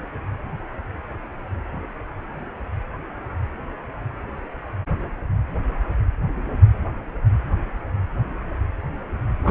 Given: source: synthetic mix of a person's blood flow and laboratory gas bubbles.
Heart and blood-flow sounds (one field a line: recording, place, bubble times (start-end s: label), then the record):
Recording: Doppler ultrasound of blood flow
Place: precordium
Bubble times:
9.45-9.51 s: bubbles
From the record:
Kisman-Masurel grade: 213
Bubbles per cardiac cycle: several, 3 to 8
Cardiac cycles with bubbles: 1 to 10%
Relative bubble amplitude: loud (0.450 to 0.775)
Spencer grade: 1 (occasional bubble signal discernible with the cardiac motion signal, with majority of cardiac periods free of bubbles)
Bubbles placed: anywhere in the cardiac cycle